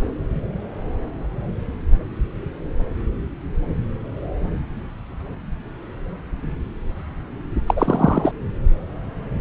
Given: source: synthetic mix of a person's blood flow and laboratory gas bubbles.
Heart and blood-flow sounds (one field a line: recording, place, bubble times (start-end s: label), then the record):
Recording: Doppler ultrasound of blood flow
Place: subclavian vein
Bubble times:
7.67-8.31 s: bubbles
From the record:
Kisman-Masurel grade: 213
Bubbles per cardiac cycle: several, 3 to 8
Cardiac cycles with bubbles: 1 to 10%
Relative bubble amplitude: loud (0.450 to 0.775)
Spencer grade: 1 (occasional bubble signal discernible with the cardiac motion signal, with majority of cardiac periods free of bubbles)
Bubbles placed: anywhere in the cardiac cycle